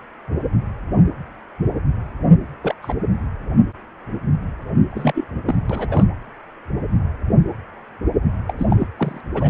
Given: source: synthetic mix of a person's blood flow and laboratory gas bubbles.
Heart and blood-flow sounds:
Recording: Doppler ultrasound of blood flow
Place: precordium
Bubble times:
2.62-2.75 s: bubbles
2.82-2.94 s: bubbles
4.90-5.24 s: bubbles
5.45-5.55 s: bubbles
5.69-6.05 s: bubbles
8.47-8.54 s: bubbles
8.58-8.67 s: bubbles
8.71-8.88 s: bubbles
8.97-9.21 s: bubbles
9.34-9.49 s: bubbles
From the record:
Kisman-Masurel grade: 222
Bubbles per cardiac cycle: several, 3 to 8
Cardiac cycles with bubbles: 10 to 50%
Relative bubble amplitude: moderate (0.250 to 0.450)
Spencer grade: 2 (many but less than half of the cardiac periods contain bubble signals, singularly or in groups)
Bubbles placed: anywhere in the cardiac cycle

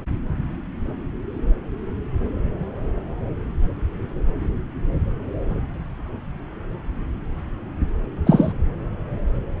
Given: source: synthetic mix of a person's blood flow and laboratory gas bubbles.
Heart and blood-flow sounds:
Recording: Doppler ultrasound of blood flow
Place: subclavian vein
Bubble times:
8.26-8.54 s: bubbles
From the record:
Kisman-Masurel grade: 113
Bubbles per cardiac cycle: 1 to 2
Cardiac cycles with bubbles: 1 to 10%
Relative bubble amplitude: loud (0.450 to 0.775)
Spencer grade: 1 (occasional bubble signal discernible with the cardiac motion signal, with majority of cardiac periods free of bubbles)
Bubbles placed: anywhere in the cardiac cycle

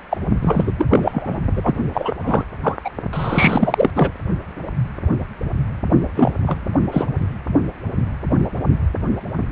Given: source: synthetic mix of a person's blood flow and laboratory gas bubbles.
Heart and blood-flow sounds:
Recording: Doppler ultrasound of blood flow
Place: precordium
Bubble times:
0.10-0.21 s: bubbles
0.43-0.72 s: bubbles
0.78-1.41 s: bubbles
1.56-1.75 s: bubbles
1.94-2.13 s: bubbles
2.20-2.44 s: bubbles
2.63-2.76 s: bubbles
2.84-2.91 s: bubbles
3.13-3.91 s: bubbles
3.95-4.12 s: bubbles
6.16-6.31 s: bubbles
6.46-6.67 s: bubbles
6.91-7.11 s: bubbles
From the record:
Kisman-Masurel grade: 333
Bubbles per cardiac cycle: rolling drumbeat, 9 or more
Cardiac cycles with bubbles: 50 to 99%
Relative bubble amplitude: loud (0.450 to 0.775)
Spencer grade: 3 (all of the cardiac periods contain showers or single bubble signals, but not dominating or overriding the cardiac motion signals)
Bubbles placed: only in the low amplitude regions of the cardiac cycle

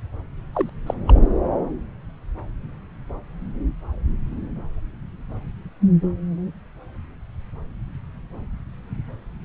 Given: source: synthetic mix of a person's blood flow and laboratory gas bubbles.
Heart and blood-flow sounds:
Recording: Doppler ultrasound of blood flow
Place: subclavian vein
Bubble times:
0.52-0.70 s: bubbles
0.86-0.94 s: bubbles
1.06-1.22 s: bubbles
From the record:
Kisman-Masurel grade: 212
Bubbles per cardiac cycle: several, 3 to 8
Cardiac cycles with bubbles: 1 to 10%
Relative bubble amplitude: moderate (0.250 to 0.450)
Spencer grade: 1 (occasional bubble signal discernible with the cardiac motion signal, with majority of cardiac periods free of bubbles)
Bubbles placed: anywhere in the cardiac cycle

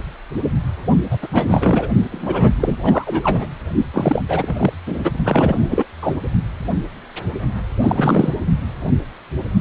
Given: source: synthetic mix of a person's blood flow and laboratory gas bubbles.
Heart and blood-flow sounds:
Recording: Doppler ultrasound of blood flow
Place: precordium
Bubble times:
1.10-1.18 s: bubbles
1.22-1.28 s: bubbles
1.31-1.86 s: bubbles
2.12-2.51 s: bubbles
2.60-2.78 s: bubbles
2.82-3.50 s: bubbles
3.93-4.25 s: bubbles
4.28-4.73 s: bubbles
4.86-5.12 s: bubbles
5.24-5.86 s: bubbles
6.02-6.17 s: bubbles
7.82-8.36 s: bubbles
From the record:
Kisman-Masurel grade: 333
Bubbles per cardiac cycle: rolling drumbeat, 9 or more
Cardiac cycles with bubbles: 50 to 99%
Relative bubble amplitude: loud (0.450 to 0.775)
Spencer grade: 3 (all of the cardiac periods contain showers or single bubble signals, but not dominating or overriding the cardiac motion signals)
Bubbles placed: only in the low amplitude regions of the cardiac cycle

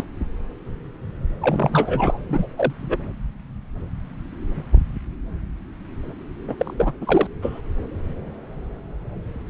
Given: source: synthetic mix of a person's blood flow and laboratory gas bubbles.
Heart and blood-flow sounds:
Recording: Doppler ultrasound of blood flow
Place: subclavian vein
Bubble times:
0.00-0.05 s: bubbles
1.41-2.19 s: bubbles
2.29-2.47 s: bubbles
2.58-2.73 s: bubbles
2.83-2.97 s: bubbles
6.48-6.92 s: bubbles
7.01-7.27 s: bubbles
7.42-7.61 s: bubbles
From the record:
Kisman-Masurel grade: 222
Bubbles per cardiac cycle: several, 3 to 8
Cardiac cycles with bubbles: 10 to 50%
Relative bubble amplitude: moderate (0.250 to 0.450)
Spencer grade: 2 (many but less than half of the cardiac periods contain bubble signals, singularly or in groups)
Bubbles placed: anywhere in the cardiac cycle

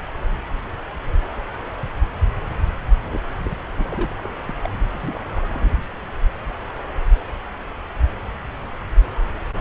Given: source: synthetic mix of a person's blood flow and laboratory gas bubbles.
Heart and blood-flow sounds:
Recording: Doppler ultrasound of blood flow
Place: subclavian vein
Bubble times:
3.03-3.20 s: bubbles
3.44-3.69 s: bubbles
3.75-4.17 s: bubbles
4.19-4.29 s: bubbles
4.47-4.53 s: bubbles
4.56-4.70 s: bubbles
4.94-5.21 s: bubbles
5.35-5.43 s: bubbles
5.49-5.80 s: bubbles
From the record:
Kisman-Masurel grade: 221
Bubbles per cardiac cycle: several, 3 to 8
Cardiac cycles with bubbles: 10 to 50%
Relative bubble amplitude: barely perceptible (0.100 to 0.250)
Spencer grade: 2 (many but less than half of the cardiac periods contain bubble signals, singularly or in groups)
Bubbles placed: anywhere in the cardiac cycle

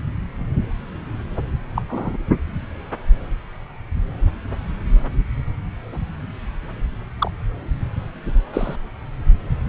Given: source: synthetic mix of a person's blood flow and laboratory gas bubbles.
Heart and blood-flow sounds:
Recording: Doppler ultrasound of blood flow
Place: subclavian vein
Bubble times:
1.74-1.82 s: bubbles
1.88-2.18 s: bubbles
7.19-7.31 s: bubbles
8.53-8.76 s: bubbles
From the record:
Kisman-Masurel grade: 122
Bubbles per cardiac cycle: 1 to 2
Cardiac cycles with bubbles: 10 to 50%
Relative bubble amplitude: moderate (0.250 to 0.450)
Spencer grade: 2 (many but less than half of the cardiac periods contain bubble signals, singularly or in groups)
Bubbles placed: anywhere in the cardiac cycle

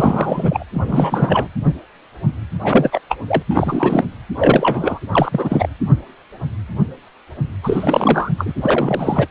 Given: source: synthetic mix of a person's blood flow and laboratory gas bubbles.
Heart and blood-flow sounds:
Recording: Doppler ultrasound of blood flow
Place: precordium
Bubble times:
0.00-0.64 s: bubbles
0.74-1.48 s: bubbles
2.62-3.00 s: bubbles
3.09-3.17 s: bubbles
3.27-3.42 s: bubbles
3.50-4.04 s: bubbles
4.36-4.99 s: bubbles
5.11-5.69 s: bubbles
7.63-8.30 s: bubbles
8.38-8.51 s: bubbles
8.57-9.28 s: bubbles
From the record:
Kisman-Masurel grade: 333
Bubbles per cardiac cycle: rolling drumbeat, 9 or more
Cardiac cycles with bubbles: 50 to 99%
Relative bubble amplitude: loud (0.450 to 0.775)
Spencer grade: 3 (all of the cardiac periods contain showers or single bubble signals, but not dominating or overriding the cardiac motion signals)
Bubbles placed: anywhere in the cardiac cycle

